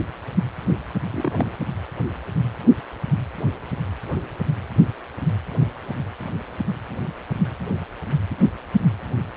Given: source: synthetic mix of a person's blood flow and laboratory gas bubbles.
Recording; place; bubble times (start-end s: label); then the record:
Doppler ultrasound of blood flow; precordium
1.11-1.46 s: bubbles
From the record:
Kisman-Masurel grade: 111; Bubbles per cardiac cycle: 1 to 2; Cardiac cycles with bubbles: 1 to 10%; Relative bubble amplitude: barely perceptible (0.100 to 0.250); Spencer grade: 1 (occasional bubble signal discernible with the cardiac motion signal, with majority of cardiac periods free of bubbles); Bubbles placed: anywhere in the cardiac cycle